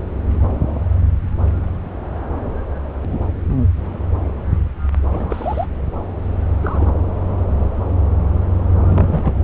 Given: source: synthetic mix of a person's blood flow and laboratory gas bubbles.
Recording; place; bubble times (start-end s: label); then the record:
Doppler ultrasound of blood flow; subclavian vein
5.10-5.66 s: bubbles
6.60-6.92 s: bubbles
8.84-9.42 s: bubbles
From the record:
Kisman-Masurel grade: 222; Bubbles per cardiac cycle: several, 3 to 8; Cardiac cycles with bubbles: 10 to 50%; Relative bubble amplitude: moderate (0.250 to 0.450); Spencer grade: 2 (many but less than half of the cardiac periods contain bubble signals, singularly or in groups); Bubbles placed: anywhere in the cardiac cycle